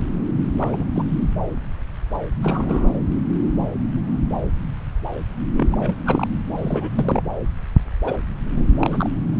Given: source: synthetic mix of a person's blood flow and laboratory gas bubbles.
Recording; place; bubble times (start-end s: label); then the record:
Doppler ultrasound of blood flow; subclavian vein
0.58-0.85 s: bubbles
0.95-1.03 s: bubbles
2.43-2.91 s: bubbles
5.55-5.67 s: bubbles
5.71-5.94 s: bubbles
6.05-6.27 s: bubbles
6.55-6.89 s: bubbles
6.96-7.22 s: bubbles
8.04-8.18 s: bubbles
8.56-8.64 s: bubbles
8.78-9.09 s: bubbles
From the record:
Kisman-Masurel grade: 232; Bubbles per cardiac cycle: several, 3 to 8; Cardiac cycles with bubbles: 50 to 99%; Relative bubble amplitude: moderate (0.250 to 0.450); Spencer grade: 3 (all of the cardiac periods contain showers or single bubble signals, but not dominating or overriding the cardiac motion signals); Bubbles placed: anywhere in the cardiac cycle